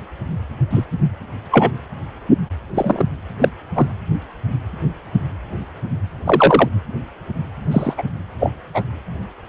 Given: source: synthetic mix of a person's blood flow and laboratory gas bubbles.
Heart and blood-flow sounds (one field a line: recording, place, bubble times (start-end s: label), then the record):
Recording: Doppler ultrasound of blood flow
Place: precordium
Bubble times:
0.69-0.85 s: bubbles
1.50-1.71 s: bubbles
2.75-3.04 s: bubbles
3.40-3.49 s: bubbles
3.75-3.89 s: bubbles
6.25-6.68 s: bubbles
7.71-7.94 s: bubbles
7.98-8.04 s: bubbles
8.39-8.52 s: bubbles
8.74-8.83 s: bubbles
From the record:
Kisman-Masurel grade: 123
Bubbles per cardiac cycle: 1 to 2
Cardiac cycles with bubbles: 10 to 50%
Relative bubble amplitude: loud (0.450 to 0.775)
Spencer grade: 2 (many but less than half of the cardiac periods contain bubble signals, singularly or in groups)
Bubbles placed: anywhere in the cardiac cycle